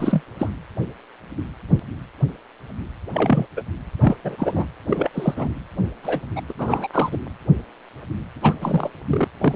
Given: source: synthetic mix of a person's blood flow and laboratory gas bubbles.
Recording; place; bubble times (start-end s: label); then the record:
Doppler ultrasound of blood flow; precordium
0.00-0.21 s: bubbles
0.39-0.51 s: bubbles
3.13-3.47 s: bubbles
3.56-3.61 s: bubbles
4.00-4.17 s: bubbles
4.24-4.67 s: bubbles
4.88-5.09 s: bubbles
5.14-5.52 s: bubbles
6.03-6.20 s: bubbles
6.36-6.41 s: bubbles
6.49-6.53 s: bubbles
6.58-6.88 s: bubbles
6.93-7.18 s: bubbles
8.42-8.54 s: bubbles
8.61-8.90 s: bubbles
9.07-9.28 s: bubbles
9.40-9.56 s: bubbles
From the record:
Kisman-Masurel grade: 232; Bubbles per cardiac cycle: several, 3 to 8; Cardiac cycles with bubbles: 50 to 99%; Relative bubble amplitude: moderate (0.250 to 0.450); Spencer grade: 3 (all of the cardiac periods contain showers or single bubble signals, but not dominating or overriding the cardiac motion signals); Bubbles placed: anywhere in the cardiac cycle